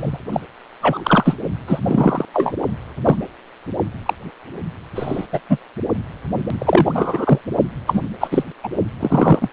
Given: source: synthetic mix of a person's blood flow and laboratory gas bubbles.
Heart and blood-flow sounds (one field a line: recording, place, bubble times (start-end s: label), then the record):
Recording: Doppler ultrasound of blood flow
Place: precordium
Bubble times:
0.00-0.18 s: bubbles
0.32-0.40 s: bubbles
0.81-1.36 s: bubbles
1.67-1.79 s: bubbles
1.85-2.25 s: bubbles
2.33-2.54 s: bubbles
3.04-3.16 s: bubbles
4.05-4.13 s: bubbles
4.95-5.26 s: bubbles
5.33-5.40 s: bubbles
5.50-5.58 s: bubbles
6.58-7.38 s: bubbles
7.87-8.01 s: bubbles
8.20-8.27 s: bubbles
8.31-8.44 s: bubbles
8.63-8.68 s: bubbles
8.99-9.49 s: bubbles
From the record:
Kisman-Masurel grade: 243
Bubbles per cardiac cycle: several, 3 to 8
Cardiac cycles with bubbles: 100%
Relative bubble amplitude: loud (0.450 to 0.775)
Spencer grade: 3 (all of the cardiac periods contain showers or single bubble signals, but not dominating or overriding the cardiac motion signals)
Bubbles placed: only in the low amplitude regions of the cardiac cycle